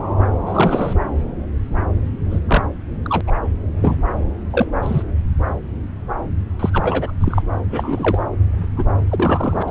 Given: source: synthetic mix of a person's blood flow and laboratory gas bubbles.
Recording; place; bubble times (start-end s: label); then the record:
Doppler ultrasound of blood flow; subclavian vein
0.46-0.94 s: bubbles
2.30-2.39 s: bubbles
2.48-2.63 s: bubbles
3.03-3.21 s: bubbles
3.27-3.32 s: bubbles
3.81-3.96 s: bubbles
4.50-4.67 s: bubbles
4.83-5.02 s: bubbles
6.59-6.70 s: bubbles
6.72-7.12 s: bubbles
7.20-7.42 s: bubbles
7.66-8.21 s: bubbles
8.76-8.85 s: bubbles
9.10-9.63 s: bubbles
9.67-9.71 s: bubbles
From the record:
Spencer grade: 3 (all of the cardiac periods contain showers or single bubble signals, but not dominating or overriding the cardiac motion signals); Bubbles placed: anywhere in the cardiac cycle